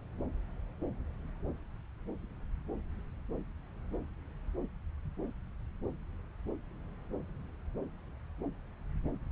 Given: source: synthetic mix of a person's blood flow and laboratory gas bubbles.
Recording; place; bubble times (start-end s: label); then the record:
Doppler ultrasound of blood flow; subclavian vein
no bubbles
From the record:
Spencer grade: 0 (complete lack of bubble signals)